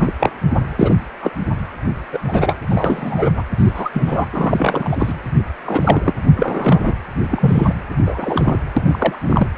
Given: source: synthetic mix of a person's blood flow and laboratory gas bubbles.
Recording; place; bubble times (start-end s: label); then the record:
Doppler ultrasound of blood flow; precordium
0.00-0.13 s: bubbles
0.20-0.30 s: bubbles
0.78-0.97 s: bubbles
1.22-1.31 s: bubbles
2.12-2.19 s: bubbles
2.23-2.56 s: bubbles
2.69-3.31 s: bubbles
3.35-3.43 s: bubbles
3.58-3.90 s: bubbles
3.94-4.26 s: bubbles
4.32-5.13 s: bubbles
5.64-6.11 s: bubbles
6.36-6.80 s: bubbles
6.83-6.94 s: bubbles
7.31-7.73 s: bubbles
8.04-8.60 s: bubbles
8.77-8.82 s: bubbles
8.87-9.19 s: bubbles
9.26-9.47 s: bubbles
From the record:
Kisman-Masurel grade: 243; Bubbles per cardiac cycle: several, 3 to 8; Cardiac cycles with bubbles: 100%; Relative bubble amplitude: loud (0.450 to 0.775); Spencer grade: 3 (all of the cardiac periods contain showers or single bubble signals, but not dominating or overriding the cardiac motion signals); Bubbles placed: anywhere in the cardiac cycle